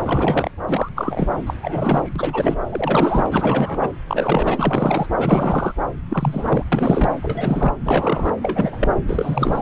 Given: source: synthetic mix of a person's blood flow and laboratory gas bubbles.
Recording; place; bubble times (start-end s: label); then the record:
Doppler ultrasound of blood flow; subclavian vein
0.06-0.51 s: bubbles
0.68-0.89 s: bubbles
0.96-1.30 s: bubbles
1.46-1.54 s: bubbles
1.62-2.12 s: bubbles
2.16-2.58 s: bubbles
2.70-3.90 s: bubbles
4.07-5.07 s: bubbles
5.19-5.72 s: bubbles
6.10-6.63 s: bubbles
6.72-7.13 s: bubbles
7.22-7.72 s: bubbles
7.85-8.33 s: bubbles
8.41-8.93 s: bubbles
9.08-9.62 s: bubbles
From the record:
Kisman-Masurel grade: 342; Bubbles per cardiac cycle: rolling drumbeat, 9 or more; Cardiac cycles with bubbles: 100%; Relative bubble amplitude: moderate (0.250 to 0.450); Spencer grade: 3 (all of the cardiac periods contain showers or single bubble signals, but not dominating or overriding the cardiac motion signals); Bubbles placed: anywhere in the cardiac cycle